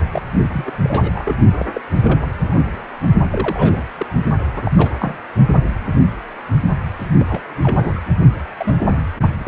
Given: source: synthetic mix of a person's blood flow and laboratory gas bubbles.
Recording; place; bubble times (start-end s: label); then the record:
Doppler ultrasound of blood flow; precordium
0.11-0.23 s: bubbles
0.53-0.71 s: bubbles
0.82-1.35 s: bubbles
1.57-1.67 s: bubbles
1.72-1.81 s: bubbles
2.02-2.27 s: bubbles
2.48-2.81 s: bubbles
3.31-3.83 s: bubbles
3.97-4.06 s: bubbles
4.52-4.71 s: bubbles
4.76-4.92 s: bubbles
4.98-5.13 s: bubbles
7.17-7.26 s: bubbles
7.29-7.41 s: bubbles
7.63-8.00 s: bubbles
8.59-8.74 s: bubbles
8.86-8.98 s: bubbles
9.39-9.48 s: bubbles
From the record:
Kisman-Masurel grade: 232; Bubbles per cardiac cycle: several, 3 to 8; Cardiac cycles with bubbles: 50 to 99%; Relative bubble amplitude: moderate (0.250 to 0.450); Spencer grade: 3 (all of the cardiac periods contain showers or single bubble signals, but not dominating or overriding the cardiac motion signals); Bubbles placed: only in the low amplitude regions of the cardiac cycle